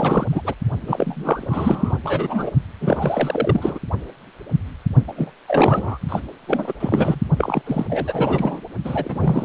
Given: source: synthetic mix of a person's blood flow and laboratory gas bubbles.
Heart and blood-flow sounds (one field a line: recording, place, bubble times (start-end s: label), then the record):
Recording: Doppler ultrasound of blood flow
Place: precordium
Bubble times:
0.00-0.26 s: bubbles
0.29-0.42 s: bubbles
0.45-0.54 s: bubbles
0.87-1.99 s: bubbles
2.04-2.50 s: bubbles
2.80-3.79 s: bubbles
5.08-5.13 s: bubbles
5.17-5.31 s: bubbles
5.48-5.98 s: bubbles
6.08-6.20 s: bubbles
6.47-6.73 s: bubbles
6.79-7.20 s: bubbles
7.38-7.62 s: bubbles
7.66-7.85 s: bubbles
7.89-8.60 s: bubbles
8.84-9.45 s: bubbles
From the record:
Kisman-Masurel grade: 333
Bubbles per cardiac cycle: rolling drumbeat, 9 or more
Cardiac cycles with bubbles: 50 to 99%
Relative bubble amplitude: loud (0.450 to 0.775)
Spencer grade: 3 (all of the cardiac periods contain showers or single bubble signals, but not dominating or overriding the cardiac motion signals)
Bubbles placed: only in the low amplitude regions of the cardiac cycle